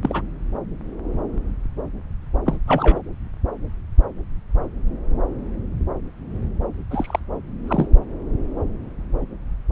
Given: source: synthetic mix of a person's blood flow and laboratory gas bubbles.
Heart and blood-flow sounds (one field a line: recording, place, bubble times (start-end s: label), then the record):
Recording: Doppler ultrasound of blood flow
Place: subclavian vein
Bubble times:
0.02-0.21 s: bubbles
2.45-2.56 s: bubbles
2.67-3.02 s: bubbles
6.91-7.20 s: bubbles
7.67-7.87 s: bubbles
From the record:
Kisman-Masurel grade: 222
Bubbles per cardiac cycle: several, 3 to 8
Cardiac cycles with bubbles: 10 to 50%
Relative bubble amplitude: moderate (0.250 to 0.450)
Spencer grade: 2 (many but less than half of the cardiac periods contain bubble signals, singularly or in groups)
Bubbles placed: anywhere in the cardiac cycle